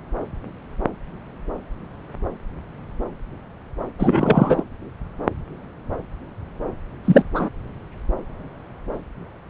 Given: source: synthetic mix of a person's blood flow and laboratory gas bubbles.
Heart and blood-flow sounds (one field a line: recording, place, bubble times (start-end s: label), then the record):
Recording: Doppler ultrasound of blood flow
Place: subclavian vein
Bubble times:
3.99-4.63 s: bubbles
7.04-7.24 s: bubbles
7.33-7.49 s: bubbles
From the record:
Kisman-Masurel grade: 223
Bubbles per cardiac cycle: several, 3 to 8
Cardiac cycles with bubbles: 10 to 50%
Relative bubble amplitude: loud (0.450 to 0.775)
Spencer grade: 2 (many but less than half of the cardiac periods contain bubble signals, singularly or in groups)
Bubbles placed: anywhere in the cardiac cycle